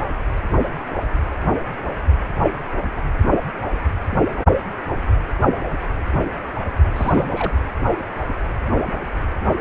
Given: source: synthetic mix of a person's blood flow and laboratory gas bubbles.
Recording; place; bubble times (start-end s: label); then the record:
Doppler ultrasound of blood flow; precordium
6.94-7.28 s: bubbles
7.34-7.52 s: bubbles
From the record:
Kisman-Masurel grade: 212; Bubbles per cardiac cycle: several, 3 to 8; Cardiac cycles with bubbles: 1 to 10%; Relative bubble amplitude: moderate (0.250 to 0.450); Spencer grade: 1 (occasional bubble signal discernible with the cardiac motion signal, with majority of cardiac periods free of bubbles); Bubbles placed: only in the low amplitude regions of the cardiac cycle